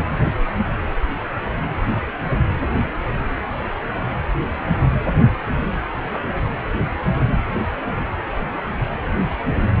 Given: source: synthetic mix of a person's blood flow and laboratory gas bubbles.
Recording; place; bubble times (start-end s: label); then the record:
Doppler ultrasound of blood flow; precordium
6.08-6.23 s: bubbles
From the record:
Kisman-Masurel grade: 111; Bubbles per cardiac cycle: 1 to 2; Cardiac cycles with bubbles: 1 to 10%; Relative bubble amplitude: barely perceptible (0.100 to 0.250); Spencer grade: 1 (occasional bubble signal discernible with the cardiac motion signal, with majority of cardiac periods free of bubbles); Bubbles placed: anywhere in the cardiac cycle